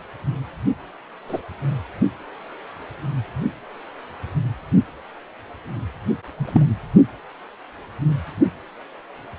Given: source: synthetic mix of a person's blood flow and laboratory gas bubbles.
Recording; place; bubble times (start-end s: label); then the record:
Doppler ultrasound of blood flow; precordium
1.28-1.41 s: bubbles
6.37-6.64 s: bubbles
From the record:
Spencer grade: 2 (many but less than half of the cardiac periods contain bubble signals, singularly or in groups); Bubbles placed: anywhere in the cardiac cycle